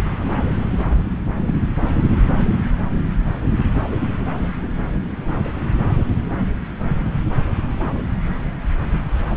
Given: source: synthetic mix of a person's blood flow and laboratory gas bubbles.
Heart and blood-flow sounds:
Doppler ultrasound of blood flow; subclavian vein
1.48-1.58 s: bubbles
1.76-1.81 s: bubbles
From the record:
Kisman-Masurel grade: 112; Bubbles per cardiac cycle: 1 to 2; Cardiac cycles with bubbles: 1 to 10%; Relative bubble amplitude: moderate (0.250 to 0.450); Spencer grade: 1 (occasional bubble signal discernible with the cardiac motion signal, with majority of cardiac periods free of bubbles); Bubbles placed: anywhere in the cardiac cycle

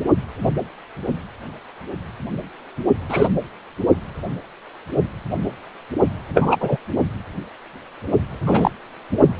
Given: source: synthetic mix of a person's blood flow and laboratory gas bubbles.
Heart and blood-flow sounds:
Doppler ultrasound of blood flow; precordium
3.08-3.28 s: bubbles
6.34-6.57 s: bubbles
6.60-6.77 s: bubbles
8.46-8.71 s: bubbles
From the record:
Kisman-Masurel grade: 123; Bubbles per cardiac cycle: 1 to 2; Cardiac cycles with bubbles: 10 to 50%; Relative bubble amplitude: loud (0.450 to 0.775); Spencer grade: 2 (many but less than half of the cardiac periods contain bubble signals, singularly or in groups); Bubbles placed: only in the low amplitude regions of the cardiac cycle

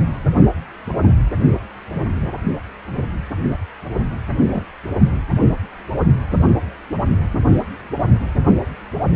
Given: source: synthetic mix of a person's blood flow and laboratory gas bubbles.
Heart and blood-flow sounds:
Doppler ultrasound of blood flow; precordium
4.38-4.61 s: bubbles
From the record:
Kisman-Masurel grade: 112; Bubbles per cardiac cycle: 1 to 2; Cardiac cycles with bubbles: 1 to 10%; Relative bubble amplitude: moderate (0.250 to 0.450); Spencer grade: 1 (occasional bubble signal discernible with the cardiac motion signal, with majority of cardiac periods free of bubbles); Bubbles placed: anywhere in the cardiac cycle

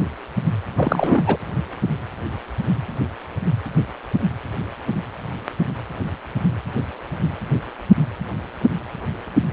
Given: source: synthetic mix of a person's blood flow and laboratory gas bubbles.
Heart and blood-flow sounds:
Doppler ultrasound of blood flow; precordium
0.76-1.23 s: bubbles
1.26-1.38 s: bubbles
From the record:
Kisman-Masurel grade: 212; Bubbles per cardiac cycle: several, 3 to 8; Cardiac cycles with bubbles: 1 to 10%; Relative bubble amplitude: moderate (0.250 to 0.450); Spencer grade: 1 (occasional bubble signal discernible with the cardiac motion signal, with majority of cardiac periods free of bubbles); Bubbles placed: anywhere in the cardiac cycle

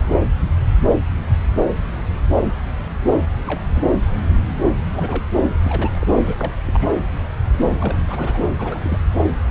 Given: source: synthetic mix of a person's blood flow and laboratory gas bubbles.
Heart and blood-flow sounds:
Doppler ultrasound of blood flow; subclavian vein
3.46-3.60 s: bubbles
3.75-3.84 s: bubbles
4.89-5.25 s: bubbles
5.45-5.57 s: bubbles
5.62-6.08 s: bubbles
6.24-6.51 s: bubbles
6.67-6.89 s: bubbles
7.74-7.98 s: bubbles
8.07-8.40 s: bubbles
8.58-8.98 s: bubbles
From the record:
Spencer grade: 2 (many but less than half of the cardiac periods contain bubble signals, singularly or in groups); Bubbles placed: anywhere in the cardiac cycle

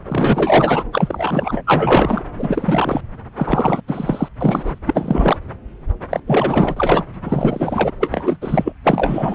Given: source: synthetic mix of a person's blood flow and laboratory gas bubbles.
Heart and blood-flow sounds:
Doppler ultrasound of blood flow; subclavian vein
0.05-0.83 s: bubbles
0.92-1.62 s: bubbles
1.67-2.22 s: bubbles
2.34-3.01 s: bubbles
3.36-3.81 s: bubbles
3.88-4.29 s: bubbles
4.40-4.79 s: bubbles
4.87-5.37 s: bubbles
6.11-6.20 s: bubbles
6.27-7.04 s: bubbles
7.24-7.91 s: bubbles
7.99-8.37 s: bubbles
8.41-8.72 s: bubbles
8.84-9.35 s: bubbles
From the record:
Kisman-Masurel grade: 333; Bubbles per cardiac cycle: rolling drumbeat, 9 or more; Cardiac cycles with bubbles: 50 to 99%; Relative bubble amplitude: loud (0.450 to 0.775); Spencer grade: 3 (all of the cardiac periods contain showers or single bubble signals, but not dominating or overriding the cardiac motion signals); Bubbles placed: anywhere in the cardiac cycle

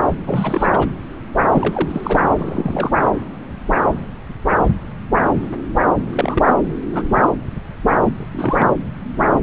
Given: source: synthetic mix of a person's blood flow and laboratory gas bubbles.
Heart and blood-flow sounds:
Doppler ultrasound of blood flow; subclavian vein
0.25-0.87 s: bubbles
1.52-2.19 s: bubbles
2.38-2.90 s: bubbles
6.12-6.54 s: bubbles
6.92-7.03 s: bubbles
7.09-7.28 s: bubbles
8.03-8.26 s: bubbles
8.33-8.66 s: bubbles
From the record:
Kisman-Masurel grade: 232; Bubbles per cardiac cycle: several, 3 to 8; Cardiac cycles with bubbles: 50 to 99%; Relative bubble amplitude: moderate (0.250 to 0.450); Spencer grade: 3 (all of the cardiac periods contain showers or single bubble signals, but not dominating or overriding the cardiac motion signals); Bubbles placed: anywhere in the cardiac cycle

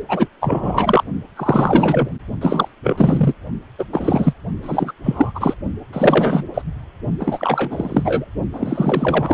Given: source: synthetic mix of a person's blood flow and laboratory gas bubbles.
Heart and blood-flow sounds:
Doppler ultrasound of blood flow; precordium
0.08-0.28 s: bubbles
0.41-1.04 s: bubbles
1.36-2.09 s: bubbles
2.41-2.68 s: bubbles
2.83-3.33 s: bubbles
3.79-3.84 s: bubbles
3.92-4.33 s: bubbles
4.62-4.93 s: bubbles
5.04-5.32 s: bubbles
5.34-5.54 s: bubbles
5.92-6.44 s: bubbles
6.54-6.62 s: bubbles
7.19-8.25 s: bubbles
8.53-9.34 s: bubbles
From the record:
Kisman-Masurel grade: 343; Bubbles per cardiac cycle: rolling drumbeat, 9 or more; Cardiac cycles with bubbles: 100%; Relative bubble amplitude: loud (0.450 to 0.775); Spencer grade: 3 (all of the cardiac periods contain showers or single bubble signals, but not dominating or overriding the cardiac motion signals); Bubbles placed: only in the low amplitude regions of the cardiac cycle

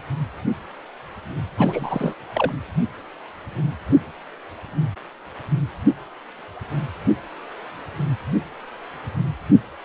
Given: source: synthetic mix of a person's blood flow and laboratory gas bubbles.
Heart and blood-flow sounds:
Doppler ultrasound of blood flow; precordium
1.57-2.15 s: bubbles
2.33-2.52 s: bubbles
From the record:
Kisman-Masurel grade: 212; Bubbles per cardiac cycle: several, 3 to 8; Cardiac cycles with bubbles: 1 to 10%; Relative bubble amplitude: moderate (0.250 to 0.450); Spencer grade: 1 (occasional bubble signal discernible with the cardiac motion signal, with majority of cardiac periods free of bubbles); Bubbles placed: anywhere in the cardiac cycle

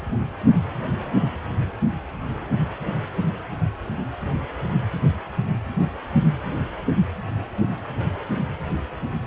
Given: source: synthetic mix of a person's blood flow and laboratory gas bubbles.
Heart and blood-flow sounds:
Doppler ultrasound of blood flow; precordium
0.11-0.15 s: bubbles
From the record:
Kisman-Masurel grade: 111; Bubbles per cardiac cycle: 1 to 2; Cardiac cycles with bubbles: 1 to 10%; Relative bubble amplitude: barely perceptible (0.100 to 0.250); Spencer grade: 1 (occasional bubble signal discernible with the cardiac motion signal, with majority of cardiac periods free of bubbles); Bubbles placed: anywhere in the cardiac cycle

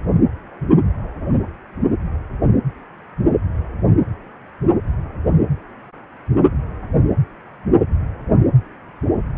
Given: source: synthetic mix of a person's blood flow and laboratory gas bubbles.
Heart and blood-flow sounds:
Doppler ultrasound of blood flow; precordium
no bubbles
From the record:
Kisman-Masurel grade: 000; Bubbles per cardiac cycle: 0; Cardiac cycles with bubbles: 0%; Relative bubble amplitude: no bubbles discernible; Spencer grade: 0 (complete lack of bubble signals)

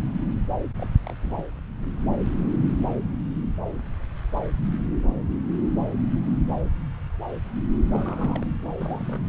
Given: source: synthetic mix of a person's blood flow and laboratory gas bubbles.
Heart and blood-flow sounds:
Doppler ultrasound of blood flow; subclavian vein
0.78-0.87 s: bubbles
1.03-1.16 s: bubbles
1.23-1.44 s: bubbles
7.91-8.47 s: bubbles
8.78-9.29 s: bubbles
From the record:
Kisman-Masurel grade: 221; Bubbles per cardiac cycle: several, 3 to 8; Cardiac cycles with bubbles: 10 to 50%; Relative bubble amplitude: barely perceptible (0.100 to 0.250); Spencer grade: 2 (many but less than half of the cardiac periods contain bubble signals, singularly or in groups); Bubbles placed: anywhere in the cardiac cycle

